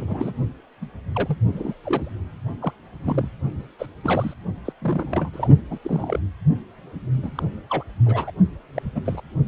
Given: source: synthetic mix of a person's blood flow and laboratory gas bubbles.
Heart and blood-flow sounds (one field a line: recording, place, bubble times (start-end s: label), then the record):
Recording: Doppler ultrasound of blood flow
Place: precordium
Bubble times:
0.00-0.33 s: bubbles
0.81-0.86 s: bubbles
1.15-1.36 s: bubbles
1.54-1.75 s: bubbles
1.83-2.13 s: bubbles
2.60-2.72 s: bubbles
3.02-3.31 s: bubbles
3.79-3.86 s: bubbles
4.03-4.33 s: bubbles
4.65-4.72 s: bubbles
4.82-5.29 s: bubbles
5.33-5.48 s: bubbles
5.70-5.79 s: bubbles
5.82-6.20 s: bubbles
7.23-7.31 s: bubbles
7.35-7.43 s: bubbles
7.70-7.83 s: bubbles
8.05-8.31 s: bubbles
8.76-8.82 s: bubbles
8.95-9.01 s: bubbles
9.05-9.20 s: bubbles
From the record:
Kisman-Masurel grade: 242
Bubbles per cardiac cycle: several, 3 to 8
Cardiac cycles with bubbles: 100%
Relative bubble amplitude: moderate (0.250 to 0.450)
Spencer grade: 3 (all of the cardiac periods contain showers or single bubble signals, but not dominating or overriding the cardiac motion signals)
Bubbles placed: only in the low amplitude regions of the cardiac cycle